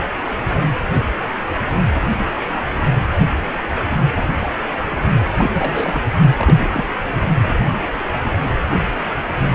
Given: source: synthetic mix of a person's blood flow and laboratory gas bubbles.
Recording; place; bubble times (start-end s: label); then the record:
Doppler ultrasound of blood flow; precordium
5.37-6.03 s: bubbles
6.19-6.24 s: bubbles
6.38-6.69 s: bubbles
6.73-6.84 s: bubbles
7.12-7.28 s: bubbles
From the record:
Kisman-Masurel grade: 222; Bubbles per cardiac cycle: several, 3 to 8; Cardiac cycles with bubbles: 10 to 50%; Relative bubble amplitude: moderate (0.250 to 0.450); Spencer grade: 2 (many but less than half of the cardiac periods contain bubble signals, singularly or in groups); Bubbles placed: anywhere in the cardiac cycle